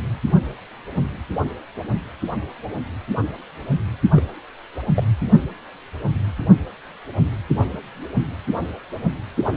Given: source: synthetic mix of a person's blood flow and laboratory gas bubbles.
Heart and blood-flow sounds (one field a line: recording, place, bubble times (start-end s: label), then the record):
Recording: Doppler ultrasound of blood flow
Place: precordium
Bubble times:
4.16-4.24 s: bubbles
4.95-5.04 s: bubbles
9.45-9.54 s: bubbles
From the record:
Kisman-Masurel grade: 121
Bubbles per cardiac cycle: 1 to 2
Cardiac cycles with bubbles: 10 to 50%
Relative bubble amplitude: barely perceptible (0.100 to 0.250)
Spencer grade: 2 (many but less than half of the cardiac periods contain bubble signals, singularly or in groups)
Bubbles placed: anywhere in the cardiac cycle